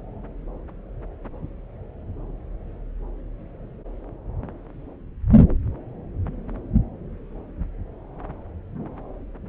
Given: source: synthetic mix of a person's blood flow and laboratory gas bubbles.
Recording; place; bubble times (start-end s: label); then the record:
Doppler ultrasound of blood flow; subclavian vein
no bubbles
From the record:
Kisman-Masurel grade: 000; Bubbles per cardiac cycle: 0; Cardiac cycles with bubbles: 0%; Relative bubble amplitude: no bubbles discernible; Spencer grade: 0 (complete lack of bubble signals)